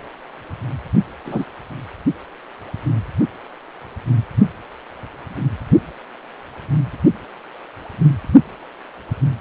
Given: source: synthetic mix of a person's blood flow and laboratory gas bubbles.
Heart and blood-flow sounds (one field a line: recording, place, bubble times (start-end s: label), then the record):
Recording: Doppler ultrasound of blood flow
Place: precordium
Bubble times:
1.25-1.45 s: bubbles
From the record:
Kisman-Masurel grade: 113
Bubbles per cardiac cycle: 1 to 2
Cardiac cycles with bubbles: 1 to 10%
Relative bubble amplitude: loud (0.450 to 0.775)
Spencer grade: 1 (occasional bubble signal discernible with the cardiac motion signal, with majority of cardiac periods free of bubbles)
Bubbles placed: only in the low amplitude regions of the cardiac cycle